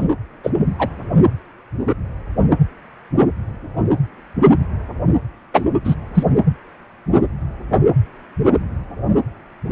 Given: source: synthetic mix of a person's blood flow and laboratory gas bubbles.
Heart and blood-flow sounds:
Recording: Doppler ultrasound of blood flow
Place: precordium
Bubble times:
0.00-0.04 s: bubbles
0.43-0.51 s: bubbles
0.79-0.88 s: bubbles
5.54-5.66 s: bubbles
5.84-5.95 s: bubbles
6.14-6.24 s: bubbles
From the record:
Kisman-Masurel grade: 123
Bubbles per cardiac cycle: 1 to 2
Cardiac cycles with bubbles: 10 to 50%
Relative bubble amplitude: loud (0.450 to 0.775)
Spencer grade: 2 (many but less than half of the cardiac periods contain bubble signals, singularly or in groups)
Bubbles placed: anywhere in the cardiac cycle

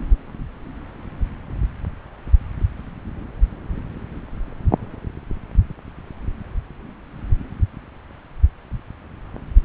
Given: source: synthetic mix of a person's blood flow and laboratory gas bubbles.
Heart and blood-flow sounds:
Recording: Doppler ultrasound of blood flow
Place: subclavian vein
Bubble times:
no bubbles
From the record:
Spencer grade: 0 (complete lack of bubble signals)

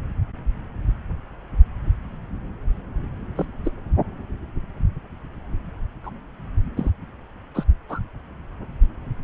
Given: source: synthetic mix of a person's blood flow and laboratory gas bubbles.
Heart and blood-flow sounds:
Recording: Doppler ultrasound of blood flow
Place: subclavian vein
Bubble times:
3.35-3.46 s: bubbles
3.65-3.72 s: bubbles
6.03-6.10 s: bubbles
6.75-6.91 s: bubbles
7.54-7.63 s: bubbles
7.88-8.00 s: bubbles
From the record:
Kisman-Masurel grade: 122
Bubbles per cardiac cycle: 1 to 2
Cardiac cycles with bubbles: 10 to 50%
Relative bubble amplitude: moderate (0.250 to 0.450)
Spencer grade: 2 (many but less than half of the cardiac periods contain bubble signals, singularly or in groups)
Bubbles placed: anywhere in the cardiac cycle

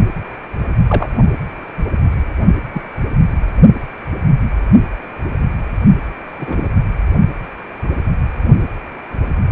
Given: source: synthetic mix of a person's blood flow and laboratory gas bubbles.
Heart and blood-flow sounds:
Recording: Doppler ultrasound of blood flow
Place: precordium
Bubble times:
0.00-0.11 s: bubbles
0.88-1.09 s: bubbles
2.73-2.81 s: bubbles
6.39-6.69 s: bubbles
From the record:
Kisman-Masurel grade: 122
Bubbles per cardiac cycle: 1 to 2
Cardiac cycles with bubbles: 10 to 50%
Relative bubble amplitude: moderate (0.250 to 0.450)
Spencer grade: 2 (many but less than half of the cardiac periods contain bubble signals, singularly or in groups)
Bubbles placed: anywhere in the cardiac cycle

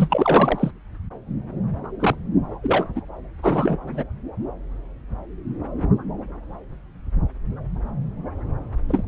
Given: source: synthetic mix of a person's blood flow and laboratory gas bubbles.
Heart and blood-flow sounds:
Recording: Doppler ultrasound of blood flow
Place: subclavian vein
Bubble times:
0.00-0.71 s: bubbles
1.99-2.15 s: bubbles
2.62-2.85 s: bubbles
2.95-3.01 s: bubbles
3.42-3.77 s: bubbles
3.86-4.04 s: bubbles
8.88-9.04 s: bubbles
From the record:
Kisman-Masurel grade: 233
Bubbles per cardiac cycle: several, 3 to 8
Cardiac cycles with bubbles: 50 to 99%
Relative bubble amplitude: loud (0.450 to 0.775)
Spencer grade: 3 (all of the cardiac periods contain showers or single bubble signals, but not dominating or overriding the cardiac motion signals)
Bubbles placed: anywhere in the cardiac cycle

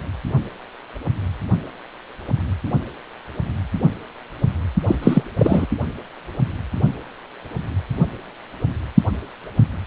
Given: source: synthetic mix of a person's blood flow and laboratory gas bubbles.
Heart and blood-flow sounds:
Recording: Doppler ultrasound of blood flow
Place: precordium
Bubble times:
4.88-4.95 s: bubbles
5.02-5.23 s: bubbles
5.39-5.66 s: bubbles
From the record:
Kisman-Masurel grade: 213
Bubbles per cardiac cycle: several, 3 to 8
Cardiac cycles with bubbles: 1 to 10%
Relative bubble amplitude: loud (0.450 to 0.775)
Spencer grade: 1 (occasional bubble signal discernible with the cardiac motion signal, with majority of cardiac periods free of bubbles)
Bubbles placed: only in the low amplitude regions of the cardiac cycle

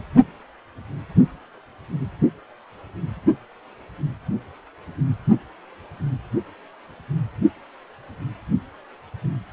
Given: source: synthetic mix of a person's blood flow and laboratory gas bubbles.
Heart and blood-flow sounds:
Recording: Doppler ultrasound of blood flow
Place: precordium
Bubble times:
no bubbles
From the record:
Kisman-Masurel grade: 000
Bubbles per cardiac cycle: 0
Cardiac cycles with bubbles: 0%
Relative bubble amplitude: no bubbles discernible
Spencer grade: 0 (complete lack of bubble signals)

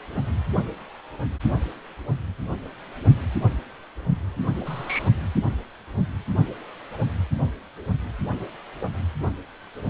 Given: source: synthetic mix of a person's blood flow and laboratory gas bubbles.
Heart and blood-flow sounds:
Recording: Doppler ultrasound of blood flow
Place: precordium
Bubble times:
4.65-5.09 s: bubbles
From the record:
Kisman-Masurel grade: 111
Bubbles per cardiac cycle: 1 to 2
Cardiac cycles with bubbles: 1 to 10%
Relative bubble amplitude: barely perceptible (0.100 to 0.250)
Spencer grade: 1 (occasional bubble signal discernible with the cardiac motion signal, with majority of cardiac periods free of bubbles)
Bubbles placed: anywhere in the cardiac cycle

